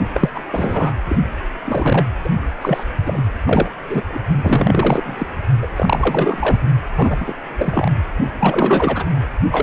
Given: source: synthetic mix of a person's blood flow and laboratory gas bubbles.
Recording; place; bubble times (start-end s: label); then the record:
Doppler ultrasound of blood flow; precordium
0.14-0.30 s: bubbles
0.35-0.43 s: bubbles
0.51-0.95 s: bubbles
1.07-1.16 s: bubbles
1.64-2.08 s: bubbles
2.24-2.29 s: bubbles
2.61-2.83 s: bubbles
3.06-3.21 s: bubbles
3.46-3.71 s: bubbles
3.90-4.03 s: bubbles
4.08-4.21 s: bubbles
4.41-5.26 s: bubbles
5.61-5.67 s: bubbles
5.76-6.59 s: bubbles
6.96-7.34 s: bubbles
7.57-7.90 s: bubbles
8.38-9.04 s: bubbles
9.51-9.62 s: bubbles
From the record:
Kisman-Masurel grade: 332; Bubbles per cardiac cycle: rolling drumbeat, 9 or more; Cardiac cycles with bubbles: 50 to 99%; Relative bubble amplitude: moderate (0.250 to 0.450); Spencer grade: 3 (all of the cardiac periods contain showers or single bubble signals, but not dominating or overriding the cardiac motion signals); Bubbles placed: only in the low amplitude regions of the cardiac cycle